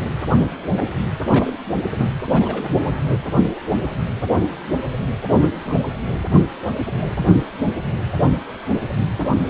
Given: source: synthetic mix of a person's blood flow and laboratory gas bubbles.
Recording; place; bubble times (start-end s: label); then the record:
Doppler ultrasound of blood flow; precordium
1.20-1.50 s: bubbles
1.73-1.79 s: bubbles
1.96-2.10 s: bubbles
2.30-2.89 s: bubbles
5.40-5.50 s: bubbles
5.66-5.81 s: bubbles
9.23-9.30 s: bubbles
9.46-9.50 s: bubbles
From the record:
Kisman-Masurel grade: 221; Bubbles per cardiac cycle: several, 3 to 8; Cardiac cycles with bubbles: 10 to 50%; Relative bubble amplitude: barely perceptible (0.100 to 0.250); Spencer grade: 2 (many but less than half of the cardiac periods contain bubble signals, singularly or in groups); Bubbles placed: anywhere in the cardiac cycle